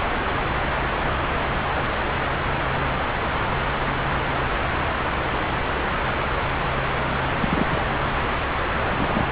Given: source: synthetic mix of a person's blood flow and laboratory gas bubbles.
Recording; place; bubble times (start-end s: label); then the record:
Doppler ultrasound of blood flow; subclavian vein
7.40-7.84 s: bubbles
8.85-9.24 s: bubbles
From the record:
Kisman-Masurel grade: 112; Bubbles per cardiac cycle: 1 to 2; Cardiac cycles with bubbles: 1 to 10%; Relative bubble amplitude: moderate (0.250 to 0.450); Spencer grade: 1 (occasional bubble signal discernible with the cardiac motion signal, with majority of cardiac periods free of bubbles); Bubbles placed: anywhere in the cardiac cycle